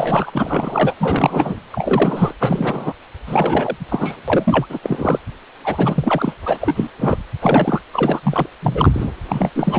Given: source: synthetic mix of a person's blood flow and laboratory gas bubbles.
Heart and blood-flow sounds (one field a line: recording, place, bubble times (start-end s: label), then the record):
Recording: Doppler ultrasound of blood flow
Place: precordium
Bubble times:
0.00-0.97 s: bubbles
1.00-1.56 s: bubbles
1.71-2.33 s: bubbles
2.40-2.93 s: bubbles
3.26-3.77 s: bubbles
3.89-4.17 s: bubbles
4.28-4.67 s: bubbles
4.69-4.79 s: bubbles
4.83-5.19 s: bubbles
5.64-6.35 s: bubbles
6.45-6.91 s: bubbles
6.99-7.17 s: bubbles
7.42-7.82 s: bubbles
7.94-8.21 s: bubbles
8.23-8.46 s: bubbles
8.62-9.10 s: bubbles
9.29-9.50 s: bubbles
9.54-9.79 s: bubbles
From the record:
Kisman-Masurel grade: 343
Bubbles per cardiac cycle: rolling drumbeat, 9 or more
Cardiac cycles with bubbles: 100%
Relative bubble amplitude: loud (0.450 to 0.775)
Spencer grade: 3 (all of the cardiac periods contain showers or single bubble signals, but not dominating or overriding the cardiac motion signals)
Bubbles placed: anywhere in the cardiac cycle